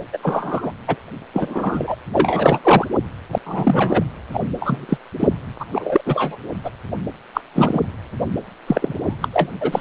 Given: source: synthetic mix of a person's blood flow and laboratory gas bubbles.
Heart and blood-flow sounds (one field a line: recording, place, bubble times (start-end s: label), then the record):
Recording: Doppler ultrasound of blood flow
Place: precordium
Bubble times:
0.12-0.18 s: bubbles
0.22-0.72 s: bubbles
0.87-0.96 s: bubbles
1.33-1.96 s: bubbles
2.13-2.88 s: bubbles
3.32-3.39 s: bubbles
3.46-4.03 s: bubbles
4.33-4.41 s: bubbles
4.60-4.98 s: bubbles
5.19-5.28 s: bubbles
5.60-5.65 s: bubbles
5.72-6.01 s: bubbles
6.06-6.36 s: bubbles
6.64-6.71 s: bubbles
7.33-7.41 s: bubbles
7.55-7.80 s: bubbles
8.67-9.16 s: bubbles
9.22-9.28 s: bubbles
9.33-9.48 s: bubbles
9.60-9.81 s: bubbles
From the record:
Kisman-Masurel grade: 233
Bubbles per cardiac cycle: several, 3 to 8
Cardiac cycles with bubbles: 50 to 99%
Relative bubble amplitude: loud (0.450 to 0.775)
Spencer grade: 3 (all of the cardiac periods contain showers or single bubble signals, but not dominating or overriding the cardiac motion signals)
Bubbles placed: anywhere in the cardiac cycle